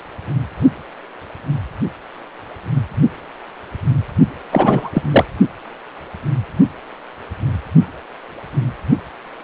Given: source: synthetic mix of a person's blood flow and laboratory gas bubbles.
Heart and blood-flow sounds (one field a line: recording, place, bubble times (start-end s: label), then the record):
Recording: Doppler ultrasound of blood flow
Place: precordium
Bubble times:
4.52-4.90 s: bubbles
4.93-5.02 s: bubbles
5.11-5.25 s: bubbles
From the record:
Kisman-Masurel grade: 213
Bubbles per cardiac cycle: several, 3 to 8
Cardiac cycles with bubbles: 1 to 10%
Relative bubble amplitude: loud (0.450 to 0.775)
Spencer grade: 1 (occasional bubble signal discernible with the cardiac motion signal, with majority of cardiac periods free of bubbles)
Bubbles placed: only in the low amplitude regions of the cardiac cycle